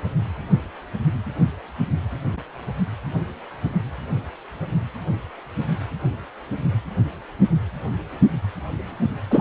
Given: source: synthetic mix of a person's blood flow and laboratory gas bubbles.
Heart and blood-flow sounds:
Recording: Doppler ultrasound of blood flow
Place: precordium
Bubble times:
9.30-9.41 s: bubbles
From the record:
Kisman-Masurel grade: 113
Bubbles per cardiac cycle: 1 to 2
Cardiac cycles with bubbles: 1 to 10%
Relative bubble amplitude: loud (0.450 to 0.775)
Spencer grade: 1 (occasional bubble signal discernible with the cardiac motion signal, with majority of cardiac periods free of bubbles)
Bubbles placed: anywhere in the cardiac cycle

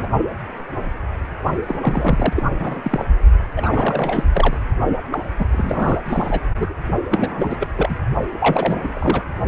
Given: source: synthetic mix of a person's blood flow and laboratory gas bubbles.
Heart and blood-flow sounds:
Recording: Doppler ultrasound of blood flow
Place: precordium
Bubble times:
0.00-0.09 s: bubbles
1.67-2.33 s: bubbles
2.35-2.43 s: bubbles
2.59-3.05 s: bubbles
3.56-4.24 s: bubbles
4.33-4.57 s: bubbles
5.12-5.18 s: bubbles
5.38-5.47 s: bubbles
5.51-6.01 s: bubbles
6.05-6.41 s: bubbles
6.57-6.75 s: bubbles
7.11-7.57 s: bubbles
7.60-7.67 s: bubbles
7.75-7.96 s: bubbles
8.39-9.22 s: bubbles
From the record:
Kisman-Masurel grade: 332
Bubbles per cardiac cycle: rolling drumbeat, 9 or more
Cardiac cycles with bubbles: 50 to 99%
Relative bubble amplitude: moderate (0.250 to 0.450)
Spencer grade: 3 (all of the cardiac periods contain showers or single bubble signals, but not dominating or overriding the cardiac motion signals)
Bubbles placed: only in the low amplitude regions of the cardiac cycle

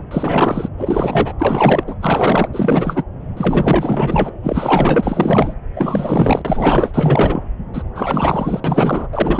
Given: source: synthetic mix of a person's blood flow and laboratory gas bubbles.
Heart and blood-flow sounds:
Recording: Doppler ultrasound of blood flow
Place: subclavian vein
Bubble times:
0.11-0.68 s: bubbles
0.78-1.33 s: bubbles
1.40-1.83 s: bubbles
1.87-1.95 s: bubbles
2.01-2.49 s: bubbles
2.53-3.04 s: bubbles
3.37-4.29 s: bubbles
4.42-5.55 s: bubbles
5.75-6.42 s: bubbles
6.44-7.43 s: bubbles
7.73-7.83 s: bubbles
7.95-8.61 s: bubbles
8.64-9.07 s: bubbles
9.12-9.40 s: bubbles
From the record:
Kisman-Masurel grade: 444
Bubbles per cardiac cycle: continuous sound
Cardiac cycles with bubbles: 100%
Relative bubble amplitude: maximal (0.775 to 0.999)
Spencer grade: 4 (maximum detectable bubble signal sounding continuously throughout systole and diastole of every cardiac period, and overriding the amplitude of the normal cardiac signals)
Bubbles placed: anywhere in the cardiac cycle

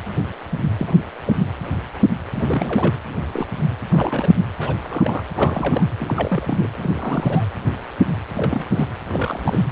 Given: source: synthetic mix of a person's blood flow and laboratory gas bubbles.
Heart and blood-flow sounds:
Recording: Doppler ultrasound of blood flow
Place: precordium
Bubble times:
0.77-0.94 s: bubbles
1.26-1.32 s: bubbles
2.33-2.96 s: bubbles
3.33-3.46 s: bubbles
3.90-4.35 s: bubbles
4.59-4.75 s: bubbles
4.82-5.23 s: bubbles
5.35-5.85 s: bubbles
5.99-6.67 s: bubbles
6.76-7.44 s: bubbles
8.34-8.62 s: bubbles
8.72-8.87 s: bubbles
9.10-9.62 s: bubbles
From the record:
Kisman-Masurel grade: 232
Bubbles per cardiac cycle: several, 3 to 8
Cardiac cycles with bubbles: 50 to 99%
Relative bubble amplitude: moderate (0.250 to 0.450)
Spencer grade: 3 (all of the cardiac periods contain showers or single bubble signals, but not dominating or overriding the cardiac motion signals)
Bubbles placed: anywhere in the cardiac cycle

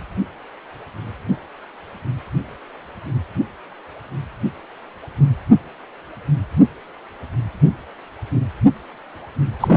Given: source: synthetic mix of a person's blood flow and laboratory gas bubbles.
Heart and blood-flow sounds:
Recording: Doppler ultrasound of blood flow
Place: precordium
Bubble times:
9.60-9.77 s: bubbles
From the record:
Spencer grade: 1 (occasional bubble signal discernible with the cardiac motion signal, with majority of cardiac periods free of bubbles)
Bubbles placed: anywhere in the cardiac cycle

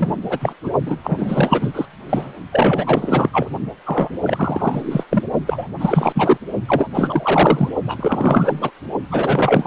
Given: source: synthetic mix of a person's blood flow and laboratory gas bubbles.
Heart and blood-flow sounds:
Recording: Doppler ultrasound of blood flow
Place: precordium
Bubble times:
0.00-0.14 s: bubbles
0.29-0.54 s: bubbles
0.63-0.71 s: bubbles
0.86-0.96 s: bubbles
1.03-1.86 s: bubbles
2.09-2.31 s: bubbles
2.52-3.29 s: bubbles
3.33-3.50 s: bubbles
3.85-4.18 s: bubbles
4.22-5.04 s: bubbles
5.10-5.23 s: bubbles
5.46-5.67 s: bubbles
5.79-6.38 s: bubbles
6.67-6.89 s: bubbles
6.93-7.73 s: bubbles
7.87-8.71 s: bubbles
9.11-9.67 s: bubbles
From the record:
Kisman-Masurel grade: 444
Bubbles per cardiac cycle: continuous sound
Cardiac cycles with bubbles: 100%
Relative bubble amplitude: maximal (0.775 to 0.999)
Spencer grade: 4 (maximum detectable bubble signal sounding continuously throughout systole and diastole of every cardiac period, and overriding the amplitude of the normal cardiac signals)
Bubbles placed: only in the low amplitude regions of the cardiac cycle

